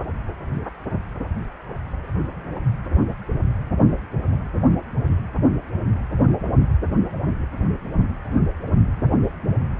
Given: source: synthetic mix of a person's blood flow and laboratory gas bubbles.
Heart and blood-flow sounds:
Doppler ultrasound of blood flow; precordium
no bubbles
From the record:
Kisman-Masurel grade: 000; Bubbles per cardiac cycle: 0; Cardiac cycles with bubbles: 0%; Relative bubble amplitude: no bubbles discernible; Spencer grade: 0 (complete lack of bubble signals)

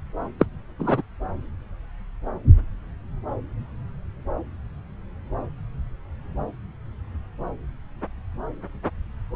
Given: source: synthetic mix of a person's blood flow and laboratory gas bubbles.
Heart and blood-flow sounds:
Doppler ultrasound of blood flow; subclavian vein
0.39-0.46 s: bubbles
0.79-1.02 s: bubbles
From the record:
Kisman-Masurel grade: 113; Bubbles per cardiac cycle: 1 to 2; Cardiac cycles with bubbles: 1 to 10%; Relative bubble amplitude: loud (0.450 to 0.775); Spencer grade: 1 (occasional bubble signal discernible with the cardiac motion signal, with majority of cardiac periods free of bubbles); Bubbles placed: anywhere in the cardiac cycle

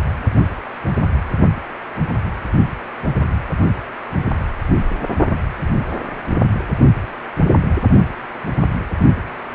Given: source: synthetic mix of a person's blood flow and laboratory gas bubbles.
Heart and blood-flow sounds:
Doppler ultrasound of blood flow; precordium
no bubbles
From the record:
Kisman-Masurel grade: 000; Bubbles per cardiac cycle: 0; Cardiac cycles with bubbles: 0%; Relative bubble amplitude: no bubbles discernible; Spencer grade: 0 (complete lack of bubble signals)

